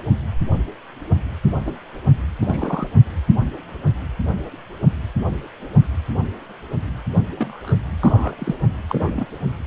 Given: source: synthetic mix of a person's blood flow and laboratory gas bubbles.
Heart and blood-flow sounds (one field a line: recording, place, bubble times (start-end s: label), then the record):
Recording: Doppler ultrasound of blood flow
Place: precordium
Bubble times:
1.67-1.72 s: bubbles
2.39-2.87 s: bubbles
7.36-7.75 s: bubbles
8.03-8.31 s: bubbles
8.38-8.55 s: bubbles
8.89-9.26 s: bubbles
From the record:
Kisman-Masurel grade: 122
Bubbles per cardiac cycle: 1 to 2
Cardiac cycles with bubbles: 10 to 50%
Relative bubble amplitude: moderate (0.250 to 0.450)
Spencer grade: 2 (many but less than half of the cardiac periods contain bubble signals, singularly or in groups)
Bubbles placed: anywhere in the cardiac cycle